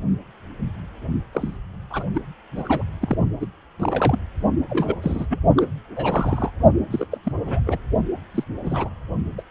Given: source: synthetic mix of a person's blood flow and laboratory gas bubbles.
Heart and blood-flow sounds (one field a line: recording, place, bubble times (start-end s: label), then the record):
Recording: Doppler ultrasound of blood flow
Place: precordium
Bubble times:
1.33-1.57 s: bubbles
1.90-2.04 s: bubbles
2.14-2.21 s: bubbles
2.56-2.83 s: bubbles
3.01-3.15 s: bubbles
3.40-3.46 s: bubbles
3.79-4.18 s: bubbles
4.70-4.96 s: bubbles
5.01-5.26 s: bubbles
5.30-5.39 s: bubbles
5.56-5.67 s: bubbles
5.96-6.51 s: bubbles
6.91-7.05 s: bubbles
7.11-7.18 s: bubbles
7.25-7.32 s: bubbles
7.47-7.60 s: bubbles
7.67-7.78 s: bubbles
8.34-8.44 s: bubbles
8.65-8.89 s: bubbles
9.38-9.42 s: bubbles
From the record:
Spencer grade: 3 (all of the cardiac periods contain showers or single bubble signals, but not dominating or overriding the cardiac motion signals)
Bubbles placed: only in the low amplitude regions of the cardiac cycle